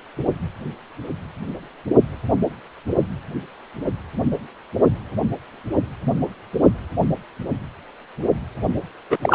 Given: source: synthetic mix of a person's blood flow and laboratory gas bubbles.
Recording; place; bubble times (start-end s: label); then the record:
Doppler ultrasound of blood flow; precordium
9.10-9.18 s: bubbles
9.22-9.35 s: bubbles
From the record:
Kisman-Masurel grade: 213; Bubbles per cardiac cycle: several, 3 to 8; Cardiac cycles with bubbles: 1 to 10%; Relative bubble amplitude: loud (0.450 to 0.775); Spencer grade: 1 (occasional bubble signal discernible with the cardiac motion signal, with majority of cardiac periods free of bubbles); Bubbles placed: anywhere in the cardiac cycle